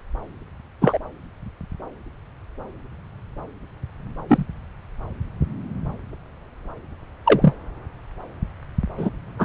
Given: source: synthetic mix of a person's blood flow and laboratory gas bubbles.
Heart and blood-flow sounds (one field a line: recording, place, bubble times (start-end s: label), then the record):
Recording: Doppler ultrasound of blood flow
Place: subclavian vein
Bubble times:
0.81-0.98 s: bubbles
4.28-4.44 s: bubbles
7.25-7.53 s: bubbles
8.97-9.10 s: bubbles
9.38-9.45 s: bubbles
From the record:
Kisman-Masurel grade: 123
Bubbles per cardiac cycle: 1 to 2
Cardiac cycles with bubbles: 10 to 50%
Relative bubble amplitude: loud (0.450 to 0.775)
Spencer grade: 2 (many but less than half of the cardiac periods contain bubble signals, singularly or in groups)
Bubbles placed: anywhere in the cardiac cycle